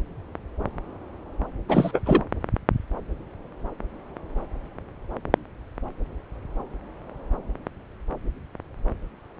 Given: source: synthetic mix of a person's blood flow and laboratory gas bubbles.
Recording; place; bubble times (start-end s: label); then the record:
Doppler ultrasound of blood flow; subclavian vein
1.69-2.01 s: bubbles
2.06-2.22 s: bubbles
From the record:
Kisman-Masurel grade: 212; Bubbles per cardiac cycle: several, 3 to 8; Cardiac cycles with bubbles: 1 to 10%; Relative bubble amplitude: moderate (0.250 to 0.450); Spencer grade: 1 (occasional bubble signal discernible with the cardiac motion signal, with majority of cardiac periods free of bubbles); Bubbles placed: anywhere in the cardiac cycle